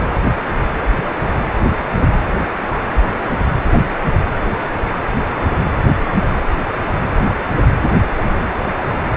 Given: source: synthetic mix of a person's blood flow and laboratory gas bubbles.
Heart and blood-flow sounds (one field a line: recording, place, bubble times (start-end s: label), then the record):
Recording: Doppler ultrasound of blood flow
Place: precordium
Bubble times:
3.15-3.40 s: bubbles
From the record:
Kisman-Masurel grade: 111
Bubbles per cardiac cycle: 1 to 2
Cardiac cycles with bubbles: 1 to 10%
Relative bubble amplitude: barely perceptible (0.100 to 0.250)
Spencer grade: 1 (occasional bubble signal discernible with the cardiac motion signal, with majority of cardiac periods free of bubbles)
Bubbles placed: anywhere in the cardiac cycle